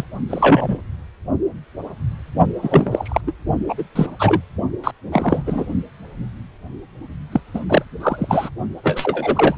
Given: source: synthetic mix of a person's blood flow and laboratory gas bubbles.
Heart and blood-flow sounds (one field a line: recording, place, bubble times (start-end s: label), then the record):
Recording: Doppler ultrasound of blood flow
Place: precordium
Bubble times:
0.00-0.04 s: bubbles
0.29-0.79 s: bubbles
2.62-3.21 s: bubbles
3.27-3.33 s: bubbles
3.69-3.75 s: bubbles
3.78-3.83 s: bubbles
3.96-4.07 s: bubbles
4.19-4.41 s: bubbles
4.83-4.91 s: bubbles
5.12-5.43 s: bubbles
5.46-5.67 s: bubbles
7.32-7.41 s: bubbles
7.54-7.60 s: bubbles
7.69-7.85 s: bubbles
8.00-8.49 s: bubbles
8.83-9.56 s: bubbles
From the record:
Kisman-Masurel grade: 233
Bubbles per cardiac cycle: several, 3 to 8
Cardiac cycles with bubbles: 50 to 99%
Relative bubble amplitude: loud (0.450 to 0.775)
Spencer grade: 3 (all of the cardiac periods contain showers or single bubble signals, but not dominating or overriding the cardiac motion signals)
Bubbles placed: only in the low amplitude regions of the cardiac cycle